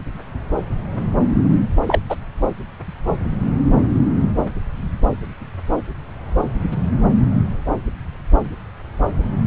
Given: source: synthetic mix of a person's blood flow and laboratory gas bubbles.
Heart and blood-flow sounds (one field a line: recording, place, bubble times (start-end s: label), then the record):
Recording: Doppler ultrasound of blood flow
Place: subclavian vein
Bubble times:
1.86-2.00 s: bubbles
2.09-2.15 s: bubbles
From the record:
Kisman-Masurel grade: 113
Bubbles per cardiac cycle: 1 to 2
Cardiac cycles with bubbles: 1 to 10%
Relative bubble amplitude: loud (0.450 to 0.775)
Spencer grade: 1 (occasional bubble signal discernible with the cardiac motion signal, with majority of cardiac periods free of bubbles)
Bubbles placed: anywhere in the cardiac cycle